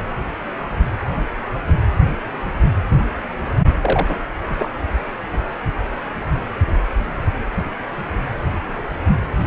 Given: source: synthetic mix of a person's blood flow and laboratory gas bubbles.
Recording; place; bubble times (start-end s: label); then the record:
Doppler ultrasound of blood flow; precordium
3.81-4.17 s: bubbles
4.50-4.55 s: bubbles
4.58-4.71 s: bubbles
From the record:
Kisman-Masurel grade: 212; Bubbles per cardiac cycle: several, 3 to 8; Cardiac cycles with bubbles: 1 to 10%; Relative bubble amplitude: moderate (0.250 to 0.450); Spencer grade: 1 (occasional bubble signal discernible with the cardiac motion signal, with majority of cardiac periods free of bubbles); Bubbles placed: anywhere in the cardiac cycle